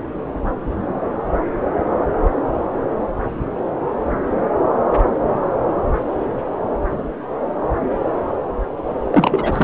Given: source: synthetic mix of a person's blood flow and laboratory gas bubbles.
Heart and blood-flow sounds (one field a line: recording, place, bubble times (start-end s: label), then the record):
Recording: Doppler ultrasound of blood flow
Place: subclavian vein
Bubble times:
9.12-9.64 s: bubbles
From the record:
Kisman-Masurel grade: 213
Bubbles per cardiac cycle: several, 3 to 8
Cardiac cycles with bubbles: 1 to 10%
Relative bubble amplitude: loud (0.450 to 0.775)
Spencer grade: 1 (occasional bubble signal discernible with the cardiac motion signal, with majority of cardiac periods free of bubbles)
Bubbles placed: anywhere in the cardiac cycle